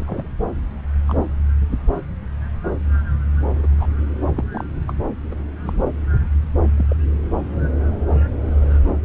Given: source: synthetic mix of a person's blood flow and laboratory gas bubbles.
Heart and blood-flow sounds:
Doppler ultrasound of blood flow; subclavian vein
0.00-0.27 s: bubbles
1.07-1.18 s: bubbles
3.54-3.67 s: bubbles
3.80-3.88 s: bubbles
4.36-4.43 s: bubbles
4.50-4.67 s: bubbles
4.88-4.93 s: bubbles
5.30-5.34 s: bubbles
5.58-5.79 s: bubbles
6.77-6.86 s: bubbles
6.90-6.96 s: bubbles
8.42-8.54 s: bubbles
From the record:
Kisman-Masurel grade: 121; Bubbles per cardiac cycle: 1 to 2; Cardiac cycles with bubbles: 10 to 50%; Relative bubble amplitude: barely perceptible (0.100 to 0.250); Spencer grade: 2 (many but less than half of the cardiac periods contain bubble signals, singularly or in groups); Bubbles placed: anywhere in the cardiac cycle

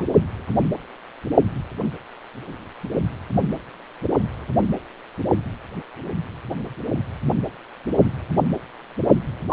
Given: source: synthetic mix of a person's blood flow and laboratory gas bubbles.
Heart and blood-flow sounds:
Doppler ultrasound of blood flow; precordium
0.00-0.04 s: bubbles
9.49-9.53 s: bubbles
From the record:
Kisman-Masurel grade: 223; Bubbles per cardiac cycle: several, 3 to 8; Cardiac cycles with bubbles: 10 to 50%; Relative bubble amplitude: loud (0.450 to 0.775); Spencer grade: 2 (many but less than half of the cardiac periods contain bubble signals, singularly or in groups); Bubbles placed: only in the low amplitude regions of the cardiac cycle

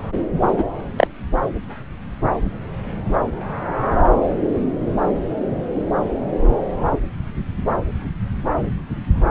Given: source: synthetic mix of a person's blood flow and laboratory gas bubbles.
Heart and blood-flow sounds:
Doppler ultrasound of blood flow; subclavian vein
0.57-0.63 s: bubbles
0.96-1.07 s: bubbles
From the record:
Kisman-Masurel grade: 113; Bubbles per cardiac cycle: 1 to 2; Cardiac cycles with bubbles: 1 to 10%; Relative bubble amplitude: loud (0.450 to 0.775); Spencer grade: 1 (occasional bubble signal discernible with the cardiac motion signal, with majority of cardiac periods free of bubbles); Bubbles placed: anywhere in the cardiac cycle

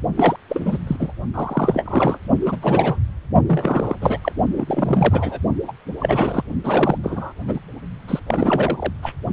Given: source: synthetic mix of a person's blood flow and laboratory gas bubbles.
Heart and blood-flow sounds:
Doppler ultrasound of blood flow; precordium
0.17-0.36 s: bubbles
0.48-0.78 s: bubbles
0.87-0.96 s: bubbles
0.99-1.12 s: bubbles
1.34-2.17 s: bubbles
2.46-2.56 s: bubbles
2.62-2.98 s: bubbles
3.46-3.96 s: bubbles
4.01-4.18 s: bubbles
4.21-4.32 s: bubbles
4.57-5.38 s: bubbles
5.67-5.72 s: bubbles
6.00-6.43 s: bubbles
6.63-6.99 s: bubbles
7.04-7.33 s: bubbles
7.47-7.60 s: bubbles
8.07-8.20 s: bubbles
8.27-8.93 s: bubbles
9.02-9.12 s: bubbles
From the record:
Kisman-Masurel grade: 342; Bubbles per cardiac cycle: rolling drumbeat, 9 or more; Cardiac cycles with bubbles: 100%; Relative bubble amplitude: moderate (0.250 to 0.450); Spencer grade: 3 (all of the cardiac periods contain showers or single bubble signals, but not dominating or overriding the cardiac motion signals); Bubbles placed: only in the low amplitude regions of the cardiac cycle

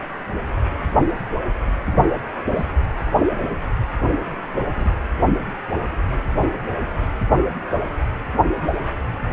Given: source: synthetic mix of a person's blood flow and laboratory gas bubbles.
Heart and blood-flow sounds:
Doppler ultrasound of blood flow; precordium
2.56-2.65 s: bubbles
3.20-3.26 s: bubbles
4.05-4.12 s: bubbles
4.76-4.88 s: bubbles
From the record:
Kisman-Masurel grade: 121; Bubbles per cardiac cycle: 1 to 2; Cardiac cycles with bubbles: 10 to 50%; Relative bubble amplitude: barely perceptible (0.100 to 0.250); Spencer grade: 2 (many but less than half of the cardiac periods contain bubble signals, singularly or in groups); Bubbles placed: anywhere in the cardiac cycle

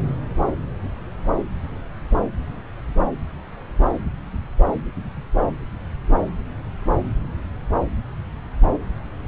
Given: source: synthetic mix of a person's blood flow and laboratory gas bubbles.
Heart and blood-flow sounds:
Doppler ultrasound of blood flow; subclavian vein
no bubbles
From the record:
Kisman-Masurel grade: 000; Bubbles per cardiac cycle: 0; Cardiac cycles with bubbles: 0%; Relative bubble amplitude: no bubbles discernible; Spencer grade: 0 (complete lack of bubble signals)

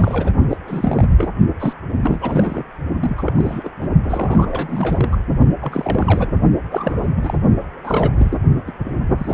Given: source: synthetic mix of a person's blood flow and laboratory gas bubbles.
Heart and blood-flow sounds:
Doppler ultrasound of blood flow; precordium
0.00-0.32 s: bubbles
0.49-0.57 s: bubbles
0.67-1.29 s: bubbles
1.60-1.73 s: bubbles
2.03-2.63 s: bubbles
3.00-3.32 s: bubbles
3.35-3.71 s: bubbles
3.79-3.87 s: bubbles
4.02-5.17 s: bubbles
5.62-6.30 s: bubbles
6.71-7.08 s: bubbles
7.15-7.38 s: bubbles
7.83-8.11 s: bubbles
8.17-8.38 s: bubbles
8.67-8.72 s: bubbles
8.84-9.00 s: bubbles
9.18-9.34 s: bubbles
From the record:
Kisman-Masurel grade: 342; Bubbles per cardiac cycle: rolling drumbeat, 9 or more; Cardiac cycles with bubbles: 100%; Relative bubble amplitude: moderate (0.250 to 0.450); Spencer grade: 3 (all of the cardiac periods contain showers or single bubble signals, but not dominating or overriding the cardiac motion signals); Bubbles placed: only in the low amplitude regions of the cardiac cycle

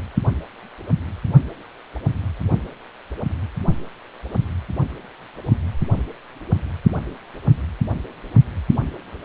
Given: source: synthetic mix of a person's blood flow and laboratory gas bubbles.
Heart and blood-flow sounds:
Doppler ultrasound of blood flow; precordium
no bubbles
From the record:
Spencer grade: 0 (complete lack of bubble signals)

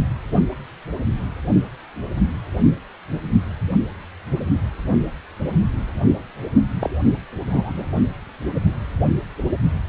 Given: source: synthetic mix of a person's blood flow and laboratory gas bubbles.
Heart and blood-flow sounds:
Doppler ultrasound of blood flow; precordium
6.81-6.90 s: bubbles
7.49-7.86 s: bubbles
From the record:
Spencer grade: 1 (occasional bubble signal discernible with the cardiac motion signal, with majority of cardiac periods free of bubbles); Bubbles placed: only in the low amplitude regions of the cardiac cycle

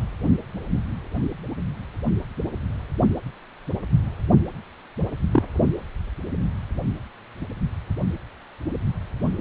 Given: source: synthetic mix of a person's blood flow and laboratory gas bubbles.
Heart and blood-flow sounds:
Doppler ultrasound of blood flow; precordium
5.33-5.42 s: bubbles
From the record:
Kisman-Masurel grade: 123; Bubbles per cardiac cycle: 1 to 2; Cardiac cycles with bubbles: 10 to 50%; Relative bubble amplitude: loud (0.450 to 0.775); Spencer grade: 2 (many but less than half of the cardiac periods contain bubble signals, singularly or in groups); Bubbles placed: anywhere in the cardiac cycle

